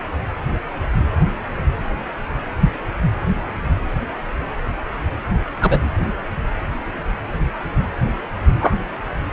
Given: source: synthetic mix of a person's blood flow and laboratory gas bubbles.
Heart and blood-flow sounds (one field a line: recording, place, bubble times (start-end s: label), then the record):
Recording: Doppler ultrasound of blood flow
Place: precordium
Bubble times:
2.60-2.70 s: bubbles
5.61-5.79 s: bubbles
8.60-8.75 s: bubbles
From the record:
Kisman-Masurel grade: 123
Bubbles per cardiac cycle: 1 to 2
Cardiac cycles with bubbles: 10 to 50%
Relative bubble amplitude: loud (0.450 to 0.775)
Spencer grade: 2 (many but less than half of the cardiac periods contain bubble signals, singularly or in groups)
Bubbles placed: anywhere in the cardiac cycle